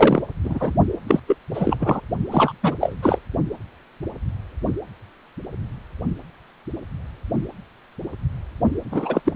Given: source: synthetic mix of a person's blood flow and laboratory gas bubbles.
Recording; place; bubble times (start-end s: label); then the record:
Doppler ultrasound of blood flow; precordium
0.00-0.20 s: bubbles
0.43-0.73 s: bubbles
1.08-1.20 s: bubbles
1.27-1.37 s: bubbles
1.54-1.77 s: bubbles
1.79-2.01 s: bubbles
2.31-2.52 s: bubbles
2.63-2.75 s: bubbles
2.80-2.96 s: bubbles
3.02-3.19 s: bubbles
8.91-9.21 s: bubbles
9.24-9.33 s: bubbles
From the record:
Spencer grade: 3 (all of the cardiac periods contain showers or single bubble signals, but not dominating or overriding the cardiac motion signals); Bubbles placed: only in the low amplitude regions of the cardiac cycle